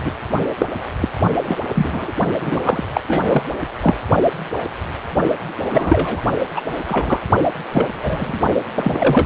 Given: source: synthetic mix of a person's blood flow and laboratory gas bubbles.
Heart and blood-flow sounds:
Doppler ultrasound of blood flow; precordium
0.04-0.13 s: bubbles
0.58-0.66 s: bubbles
1.01-1.08 s: bubbles
1.44-1.58 s: bubbles
1.74-2.12 s: bubbles
2.41-2.60 s: bubbles
2.64-2.83 s: bubbles
2.94-3.01 s: bubbles
3.08-3.42 s: bubbles
3.81-3.95 s: bubbles
5.69-6.22 s: bubbles
6.54-6.62 s: bubbles
6.86-7.21 s: bubbles
7.71-8.39 s: bubbles
8.75-9.26 s: bubbles
From the record:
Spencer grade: 3 (all of the cardiac periods contain showers or single bubble signals, but not dominating or overriding the cardiac motion signals); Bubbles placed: only in the low amplitude regions of the cardiac cycle

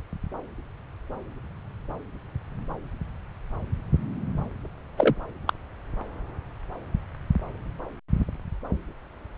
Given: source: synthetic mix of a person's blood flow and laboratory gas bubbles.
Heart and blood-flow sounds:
Doppler ultrasound of blood flow; subclavian vein
4.97-5.15 s: bubbles
5.47-5.53 s: bubbles
From the record:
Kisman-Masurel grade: 212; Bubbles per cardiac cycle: several, 3 to 8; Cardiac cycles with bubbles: 1 to 10%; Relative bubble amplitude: moderate (0.250 to 0.450); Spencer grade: 1 (occasional bubble signal discernible with the cardiac motion signal, with majority of cardiac periods free of bubbles); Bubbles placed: anywhere in the cardiac cycle

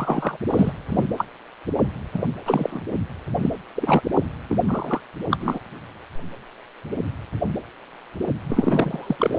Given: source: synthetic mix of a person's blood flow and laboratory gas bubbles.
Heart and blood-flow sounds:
Doppler ultrasound of blood flow; precordium
0.00-0.37 s: bubbles
0.48-0.73 s: bubbles
0.89-1.03 s: bubbles
1.17-1.25 s: bubbles
2.13-2.23 s: bubbles
2.46-2.81 s: bubbles
3.42-3.50 s: bubbles
3.76-4.01 s: bubbles
4.49-4.58 s: bubbles
4.66-5.01 s: bubbles
5.31-5.38 s: bubbles
5.40-5.59 s: bubbles
8.48-9.17 s: bubbles
9.20-9.39 s: bubbles
From the record:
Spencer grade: 3 (all of the cardiac periods contain showers or single bubble signals, but not dominating or overriding the cardiac motion signals); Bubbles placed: anywhere in the cardiac cycle

